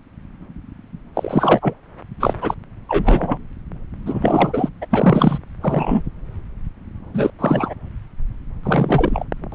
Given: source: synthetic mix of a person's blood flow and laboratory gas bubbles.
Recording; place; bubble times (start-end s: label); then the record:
Doppler ultrasound of blood flow; subclavian vein
1.15-1.74 s: bubbles
2.19-2.34 s: bubbles
2.41-2.54 s: bubbles
2.88-3.38 s: bubbles
4.06-4.70 s: bubbles
4.81-4.86 s: bubbles
4.91-5.39 s: bubbles
5.61-6.02 s: bubbles
7.14-7.30 s: bubbles
7.39-7.74 s: bubbles
8.63-9.25 s: bubbles
9.52-9.55 s: bubbles
From the record:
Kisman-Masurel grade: 233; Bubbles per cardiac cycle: several, 3 to 8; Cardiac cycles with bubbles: 50 to 99%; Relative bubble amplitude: loud (0.450 to 0.775); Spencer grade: 3 (all of the cardiac periods contain showers or single bubble signals, but not dominating or overriding the cardiac motion signals); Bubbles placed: anywhere in the cardiac cycle